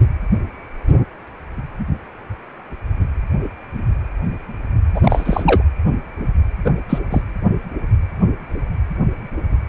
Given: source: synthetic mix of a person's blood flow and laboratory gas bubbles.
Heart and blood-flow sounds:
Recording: Doppler ultrasound of blood flow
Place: precordium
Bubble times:
4.94-5.63 s: bubbles
6.65-6.71 s: bubbles
6.89-6.99 s: bubbles
7.10-7.21 s: bubbles
From the record:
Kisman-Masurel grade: 223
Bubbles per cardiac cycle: several, 3 to 8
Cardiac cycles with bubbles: 10 to 50%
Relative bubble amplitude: loud (0.450 to 0.775)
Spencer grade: 2 (many but less than half of the cardiac periods contain bubble signals, singularly or in groups)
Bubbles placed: anywhere in the cardiac cycle

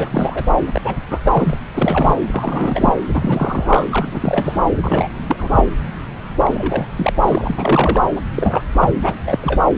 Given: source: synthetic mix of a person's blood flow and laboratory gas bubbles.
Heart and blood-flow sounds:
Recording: Doppler ultrasound of blood flow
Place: subclavian vein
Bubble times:
0.00-0.45 s: bubbles
0.67-0.96 s: bubbles
1.08-1.19 s: bubbles
1.23-1.57 s: bubbles
1.74-2.15 s: bubbles
2.26-2.92 s: bubbles
3.09-3.84 s: bubbles
3.90-4.58 s: bubbles
4.83-5.08 s: bubbles
5.26-5.64 s: bubbles
6.38-6.90 s: bubbles
6.97-7.13 s: bubbles
7.22-8.02 s: bubbles
8.16-8.21 s: bubbles
8.31-8.67 s: bubbles
8.79-8.95 s: bubbles
9.01-9.15 s: bubbles
9.25-9.61 s: bubbles
From the record:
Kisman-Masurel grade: 342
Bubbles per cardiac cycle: rolling drumbeat, 9 or more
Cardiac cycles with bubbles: 100%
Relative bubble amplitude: moderate (0.250 to 0.450)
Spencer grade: 3 (all of the cardiac periods contain showers or single bubble signals, but not dominating or overriding the cardiac motion signals)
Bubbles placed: anywhere in the cardiac cycle

